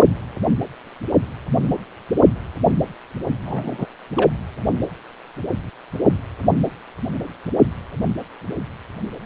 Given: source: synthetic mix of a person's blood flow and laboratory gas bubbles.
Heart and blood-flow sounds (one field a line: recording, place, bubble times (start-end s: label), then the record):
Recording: Doppler ultrasound of blood flow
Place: precordium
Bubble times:
3.45-3.86 s: bubbles
4.17-4.29 s: bubbles
From the record:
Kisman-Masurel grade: 112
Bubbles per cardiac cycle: 1 to 2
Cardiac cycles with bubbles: 1 to 10%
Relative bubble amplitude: moderate (0.250 to 0.450)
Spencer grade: 1 (occasional bubble signal discernible with the cardiac motion signal, with majority of cardiac periods free of bubbles)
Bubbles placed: anywhere in the cardiac cycle